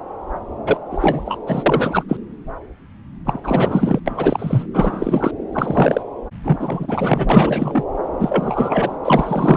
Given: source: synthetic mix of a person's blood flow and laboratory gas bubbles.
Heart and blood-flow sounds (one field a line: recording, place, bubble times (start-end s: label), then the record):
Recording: Doppler ultrasound of blood flow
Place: subclavian vein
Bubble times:
0.66-0.78 s: bubbles
0.90-1.38 s: bubbles
1.47-1.64 s: bubbles
1.66-2.04 s: bubbles
2.08-2.17 s: bubbles
3.25-3.40 s: bubbles
3.43-3.99 s: bubbles
4.06-4.65 s: bubbles
4.73-5.31 s: bubbles
5.53-6.02 s: bubbles
6.43-7.84 s: bubbles
8.19-8.97 s: bubbles
9.04-9.57 s: bubbles
From the record:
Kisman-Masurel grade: 333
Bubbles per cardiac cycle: rolling drumbeat, 9 or more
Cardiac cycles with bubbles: 50 to 99%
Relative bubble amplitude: loud (0.450 to 0.775)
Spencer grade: 3 (all of the cardiac periods contain showers or single bubble signals, but not dominating or overriding the cardiac motion signals)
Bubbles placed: anywhere in the cardiac cycle